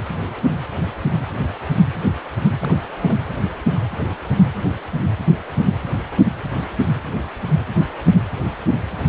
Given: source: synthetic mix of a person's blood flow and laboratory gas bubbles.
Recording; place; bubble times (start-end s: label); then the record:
Doppler ultrasound of blood flow; precordium
2.61-2.73 s: bubbles
3.02-3.15 s: bubbles
From the record:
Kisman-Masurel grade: 211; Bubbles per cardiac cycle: several, 3 to 8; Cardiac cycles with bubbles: 1 to 10%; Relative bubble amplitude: barely perceptible (0.100 to 0.250); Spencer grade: 1 (occasional bubble signal discernible with the cardiac motion signal, with majority of cardiac periods free of bubbles); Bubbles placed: anywhere in the cardiac cycle